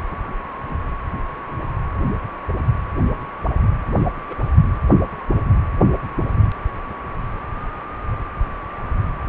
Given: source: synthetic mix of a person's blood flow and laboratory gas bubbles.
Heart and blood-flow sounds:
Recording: Doppler ultrasound of blood flow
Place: precordium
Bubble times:
4.29-4.36 s: bubbles
From the record:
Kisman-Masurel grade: 111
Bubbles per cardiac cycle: 1 to 2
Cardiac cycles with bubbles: 1 to 10%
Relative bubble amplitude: barely perceptible (0.100 to 0.250)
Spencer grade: 1 (occasional bubble signal discernible with the cardiac motion signal, with majority of cardiac periods free of bubbles)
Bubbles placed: anywhere in the cardiac cycle

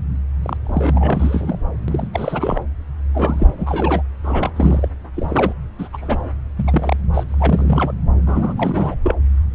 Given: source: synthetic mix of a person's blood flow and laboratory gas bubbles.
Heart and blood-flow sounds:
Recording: Doppler ultrasound of blood flow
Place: subclavian vein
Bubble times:
0.43-0.57 s: bubbles
0.65-1.56 s: bubbles
1.88-2.08 s: bubbles
2.12-2.60 s: bubbles
3.15-3.54 s: bubbles
3.57-4.03 s: bubbles
4.24-4.51 s: bubbles
4.56-4.88 s: bubbles
5.14-5.53 s: bubbles
5.79-5.88 s: bubbles
5.93-6.21 s: bubbles
6.57-6.96 s: bubbles
7.13-7.24 s: bubbles
7.28-7.92 s: bubbles
8.27-8.54 s: bubbles
8.57-8.95 s: bubbles
9.03-9.15 s: bubbles
From the record:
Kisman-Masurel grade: 342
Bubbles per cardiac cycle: rolling drumbeat, 9 or more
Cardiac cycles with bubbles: 100%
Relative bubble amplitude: moderate (0.250 to 0.450)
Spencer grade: 3 (all of the cardiac periods contain showers or single bubble signals, but not dominating or overriding the cardiac motion signals)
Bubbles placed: anywhere in the cardiac cycle

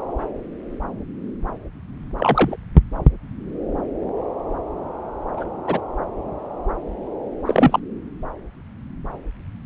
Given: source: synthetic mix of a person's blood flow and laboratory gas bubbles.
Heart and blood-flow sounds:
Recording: Doppler ultrasound of blood flow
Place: subclavian vein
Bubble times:
2.17-2.56 s: bubbles
5.37-5.44 s: bubbles
5.67-5.81 s: bubbles
7.46-7.79 s: bubbles
From the record:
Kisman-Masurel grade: 122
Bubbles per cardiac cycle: 1 to 2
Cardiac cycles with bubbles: 10 to 50%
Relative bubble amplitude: moderate (0.250 to 0.450)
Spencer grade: 2 (many but less than half of the cardiac periods contain bubble signals, singularly or in groups)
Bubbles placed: anywhere in the cardiac cycle

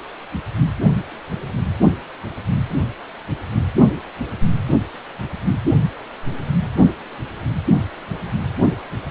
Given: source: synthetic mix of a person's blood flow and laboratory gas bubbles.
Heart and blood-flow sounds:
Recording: Doppler ultrasound of blood flow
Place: precordium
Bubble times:
no bubbles
From the record:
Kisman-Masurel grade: 000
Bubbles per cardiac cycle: 0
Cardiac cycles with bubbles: 0%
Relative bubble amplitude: no bubbles discernible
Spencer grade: 0 (complete lack of bubble signals)

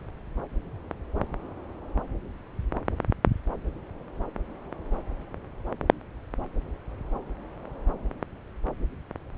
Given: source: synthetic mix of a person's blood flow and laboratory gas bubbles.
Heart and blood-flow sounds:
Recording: Doppler ultrasound of blood flow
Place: subclavian vein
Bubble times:
no bubbles
From the record:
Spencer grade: 0 (complete lack of bubble signals)

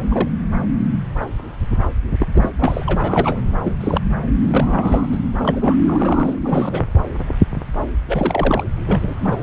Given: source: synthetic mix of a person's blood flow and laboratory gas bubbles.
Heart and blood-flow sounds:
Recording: Doppler ultrasound of blood flow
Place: subclavian vein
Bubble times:
0.11-0.28 s: bubbles
2.19-2.27 s: bubbles
2.33-2.50 s: bubbles
2.58-3.41 s: bubbles
3.63-3.72 s: bubbles
3.80-4.01 s: bubbles
4.42-5.07 s: bubbles
5.12-5.19 s: bubbles
5.42-5.76 s: bubbles
5.85-6.82 s: bubbles
8.06-8.63 s: bubbles
8.75-9.37 s: bubbles
From the record:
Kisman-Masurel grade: 232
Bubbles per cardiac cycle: several, 3 to 8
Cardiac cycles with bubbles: 50 to 99%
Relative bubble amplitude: moderate (0.250 to 0.450)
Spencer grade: 3 (all of the cardiac periods contain showers or single bubble signals, but not dominating or overriding the cardiac motion signals)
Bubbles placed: anywhere in the cardiac cycle

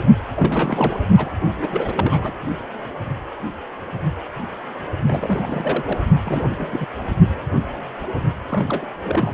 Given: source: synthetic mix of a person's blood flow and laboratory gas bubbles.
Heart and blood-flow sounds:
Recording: Doppler ultrasound of blood flow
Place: precordium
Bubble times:
0.35-0.99 s: bubbles
1.06-1.31 s: bubbles
1.59-1.67 s: bubbles
1.70-2.33 s: bubbles
5.05-5.99 s: bubbles
6.24-6.57 s: bubbles
6.60-6.87 s: bubbles
8.47-8.86 s: bubbles
9.03-9.34 s: bubbles
From the record:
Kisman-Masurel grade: 332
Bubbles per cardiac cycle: rolling drumbeat, 9 or more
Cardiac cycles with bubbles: 50 to 99%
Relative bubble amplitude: moderate (0.250 to 0.450)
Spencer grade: 3 (all of the cardiac periods contain showers or single bubble signals, but not dominating or overriding the cardiac motion signals)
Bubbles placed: only in the low amplitude regions of the cardiac cycle

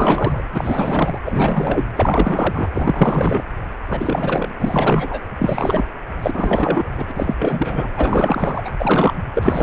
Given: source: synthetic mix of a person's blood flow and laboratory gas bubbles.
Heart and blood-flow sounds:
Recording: Doppler ultrasound of blood flow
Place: precordium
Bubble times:
0.00-0.45 s: bubbles
0.53-1.19 s: bubbles
1.25-1.84 s: bubbles
1.95-2.71 s: bubbles
2.73-3.44 s: bubbles
3.89-4.52 s: bubbles
4.59-5.21 s: bubbles
5.38-5.86 s: bubbles
6.22-7.11 s: bubbles
7.14-7.34 s: bubbles
7.39-7.88 s: bubbles
7.92-8.62 s: bubbles
8.64-8.70 s: bubbles
8.78-9.14 s: bubbles
9.34-9.63 s: bubbles
From the record:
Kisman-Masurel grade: 444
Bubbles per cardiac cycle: continuous sound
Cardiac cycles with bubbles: 100%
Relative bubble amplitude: maximal (0.775 to 0.999)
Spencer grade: 4 (maximum detectable bubble signal sounding continuously throughout systole and diastole of every cardiac period, and overriding the amplitude of the normal cardiac signals)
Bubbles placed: anywhere in the cardiac cycle

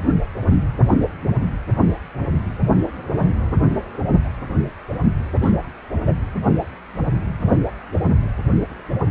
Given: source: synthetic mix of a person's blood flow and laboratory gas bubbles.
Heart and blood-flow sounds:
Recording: Doppler ultrasound of blood flow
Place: precordium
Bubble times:
5.42-5.52 s: bubbles
6.06-6.14 s: bubbles
From the record:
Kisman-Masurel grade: 113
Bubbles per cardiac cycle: 1 to 2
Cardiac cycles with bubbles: 1 to 10%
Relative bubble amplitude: loud (0.450 to 0.775)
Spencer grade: 1 (occasional bubble signal discernible with the cardiac motion signal, with majority of cardiac periods free of bubbles)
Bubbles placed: anywhere in the cardiac cycle

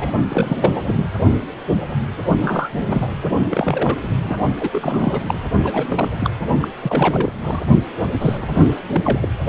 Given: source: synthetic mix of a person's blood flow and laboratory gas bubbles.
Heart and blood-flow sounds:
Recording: Doppler ultrasound of blood flow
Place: precordium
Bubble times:
0.00-0.11 s: bubbles
0.28-0.80 s: bubbles
0.86-0.94 s: bubbles
2.38-2.69 s: bubbles
2.86-3.12 s: bubbles
3.50-3.96 s: bubbles
4.03-4.08 s: bubbles
4.23-4.39 s: bubbles
4.59-4.70 s: bubbles
4.72-5.42 s: bubbles
5.62-6.08 s: bubbles
6.19-6.30 s: bubbles
6.60-6.68 s: bubbles
6.80-7.33 s: bubbles
7.42-7.61 s: bubbles
8.18-8.38 s: bubbles
8.41-8.49 s: bubbles
8.54-8.69 s: bubbles
8.92-9.28 s: bubbles
From the record:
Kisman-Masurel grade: 332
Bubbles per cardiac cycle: rolling drumbeat, 9 or more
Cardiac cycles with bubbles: 50 to 99%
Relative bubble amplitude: moderate (0.250 to 0.450)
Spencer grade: 3 (all of the cardiac periods contain showers or single bubble signals, but not dominating or overriding the cardiac motion signals)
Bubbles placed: only in the low amplitude regions of the cardiac cycle

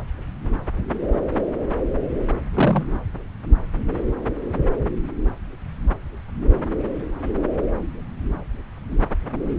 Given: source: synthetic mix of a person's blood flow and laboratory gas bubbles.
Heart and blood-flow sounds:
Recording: Doppler ultrasound of blood flow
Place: subclavian vein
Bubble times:
2.53-2.85 s: bubbles
From the record:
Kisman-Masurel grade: 113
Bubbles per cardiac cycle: 1 to 2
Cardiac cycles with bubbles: 1 to 10%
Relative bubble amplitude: loud (0.450 to 0.775)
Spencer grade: 1 (occasional bubble signal discernible with the cardiac motion signal, with majority of cardiac periods free of bubbles)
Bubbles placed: anywhere in the cardiac cycle

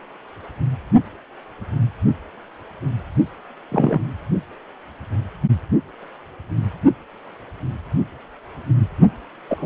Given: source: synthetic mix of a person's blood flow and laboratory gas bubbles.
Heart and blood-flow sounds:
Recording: Doppler ultrasound of blood flow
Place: precordium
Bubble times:
3.71-3.99 s: bubbles
9.48-9.66 s: bubbles
From the record:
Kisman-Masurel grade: 123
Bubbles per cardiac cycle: 1 to 2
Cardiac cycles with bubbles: 10 to 50%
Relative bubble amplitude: loud (0.450 to 0.775)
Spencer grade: 2 (many but less than half of the cardiac periods contain bubble signals, singularly or in groups)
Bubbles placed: only in the low amplitude regions of the cardiac cycle

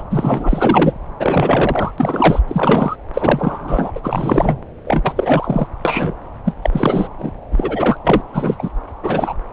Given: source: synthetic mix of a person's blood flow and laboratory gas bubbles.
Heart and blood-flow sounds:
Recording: Doppler ultrasound of blood flow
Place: subclavian vein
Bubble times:
0.00-0.03 s: bubbles
0.11-0.93 s: bubbles
1.19-1.92 s: bubbles
1.98-2.41 s: bubbles
2.48-2.96 s: bubbles
3.14-3.91 s: bubbles
3.95-4.00 s: bubbles
4.04-4.58 s: bubbles
4.85-5.13 s: bubbles
5.16-5.67 s: bubbles
5.85-6.14 s: bubbles
6.45-6.53 s: bubbles
6.62-7.08 s: bubbles
7.18-7.32 s: bubbles
7.51-7.97 s: bubbles
8.04-8.21 s: bubbles
8.28-8.56 s: bubbles
8.59-8.71 s: bubbles
9.03-9.35 s: bubbles
From the record:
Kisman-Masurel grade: 343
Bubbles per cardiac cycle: rolling drumbeat, 9 or more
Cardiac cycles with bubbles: 100%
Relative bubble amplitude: loud (0.450 to 0.775)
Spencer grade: 3 (all of the cardiac periods contain showers or single bubble signals, but not dominating or overriding the cardiac motion signals)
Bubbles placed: anywhere in the cardiac cycle

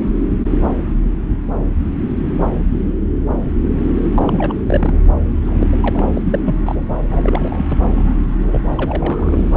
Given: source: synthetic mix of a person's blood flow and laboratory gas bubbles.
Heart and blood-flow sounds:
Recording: Doppler ultrasound of blood flow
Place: subclavian vein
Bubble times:
4.14-4.22 s: bubbles
4.26-4.55 s: bubbles
4.67-5.00 s: bubbles
5.46-5.67 s: bubbles
5.72-5.78 s: bubbles
5.80-6.04 s: bubbles
6.13-6.40 s: bubbles
6.42-6.60 s: bubbles
6.65-6.83 s: bubbles
7.08-7.66 s: bubbles
7.68-7.79 s: bubbles
7.91-8.15 s: bubbles
8.47-8.60 s: bubbles
8.77-9.57 s: bubbles
From the record:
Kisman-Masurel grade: 332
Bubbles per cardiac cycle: rolling drumbeat, 9 or more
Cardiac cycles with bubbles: 50 to 99%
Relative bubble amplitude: moderate (0.250 to 0.450)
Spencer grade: 3 (all of the cardiac periods contain showers or single bubble signals, but not dominating or overriding the cardiac motion signals)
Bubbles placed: anywhere in the cardiac cycle

